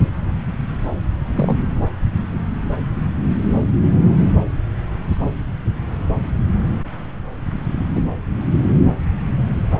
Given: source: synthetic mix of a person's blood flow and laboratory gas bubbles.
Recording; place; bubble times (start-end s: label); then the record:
Doppler ultrasound of blood flow; subclavian vein
1.35-1.55 s: bubbles
7.95-8.02 s: bubbles
From the record:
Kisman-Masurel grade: 113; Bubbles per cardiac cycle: 1 to 2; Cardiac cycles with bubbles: 1 to 10%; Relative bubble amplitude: loud (0.450 to 0.775); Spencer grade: 1 (occasional bubble signal discernible with the cardiac motion signal, with majority of cardiac periods free of bubbles); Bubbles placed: anywhere in the cardiac cycle